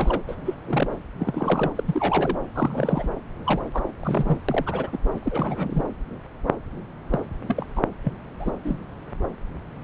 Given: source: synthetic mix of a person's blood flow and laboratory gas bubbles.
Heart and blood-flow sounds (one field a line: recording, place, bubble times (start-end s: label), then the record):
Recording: Doppler ultrasound of blood flow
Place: subclavian vein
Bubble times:
0.00-0.21 s: bubbles
0.27-0.35 s: bubbles
0.45-0.55 s: bubbles
0.65-0.87 s: bubbles
1.18-1.72 s: bubbles
1.75-2.37 s: bubbles
2.55-3.07 s: bubbles
3.44-3.61 s: bubbles
3.73-3.83 s: bubbles
3.99-4.38 s: bubbles
4.49-4.90 s: bubbles
4.92-4.98 s: bubbles
5.14-5.19 s: bubbles
5.23-5.84 s: bubbles
7.11-7.20 s: bubbles
7.48-7.66 s: bubbles
7.75-7.82 s: bubbles
8.04-8.12 s: bubbles
8.39-8.51 s: bubbles
8.64-8.79 s: bubbles
From the record:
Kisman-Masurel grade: 232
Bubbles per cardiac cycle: several, 3 to 8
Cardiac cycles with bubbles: 50 to 99%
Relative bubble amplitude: moderate (0.250 to 0.450)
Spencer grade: 3 (all of the cardiac periods contain showers or single bubble signals, but not dominating or overriding the cardiac motion signals)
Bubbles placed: anywhere in the cardiac cycle